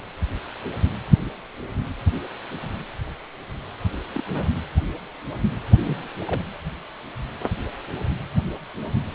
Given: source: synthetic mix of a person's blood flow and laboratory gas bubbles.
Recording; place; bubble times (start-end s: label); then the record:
Doppler ultrasound of blood flow; precordium
4.14-4.24 s: bubbles
4.32-4.51 s: bubbles
5.83-6.08 s: bubbles
6.20-6.42 s: bubbles
From the record:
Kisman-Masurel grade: 121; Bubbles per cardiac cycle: 1 to 2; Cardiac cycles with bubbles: 10 to 50%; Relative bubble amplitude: barely perceptible (0.100 to 0.250); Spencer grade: 2 (many but less than half of the cardiac periods contain bubble signals, singularly or in groups); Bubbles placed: anywhere in the cardiac cycle